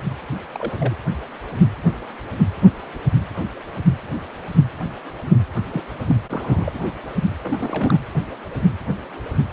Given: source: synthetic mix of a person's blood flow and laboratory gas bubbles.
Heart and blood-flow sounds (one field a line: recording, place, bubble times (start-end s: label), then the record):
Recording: Doppler ultrasound of blood flow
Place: precordium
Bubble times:
0.52-0.97 s: bubbles
5.70-5.82 s: bubbles
6.07-6.15 s: bubbles
6.28-6.81 s: bubbles
7.42-7.99 s: bubbles
From the record:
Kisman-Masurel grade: 221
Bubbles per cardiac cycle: several, 3 to 8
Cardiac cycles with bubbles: 10 to 50%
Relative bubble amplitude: barely perceptible (0.100 to 0.250)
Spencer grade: 2 (many but less than half of the cardiac periods contain bubble signals, singularly or in groups)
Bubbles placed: anywhere in the cardiac cycle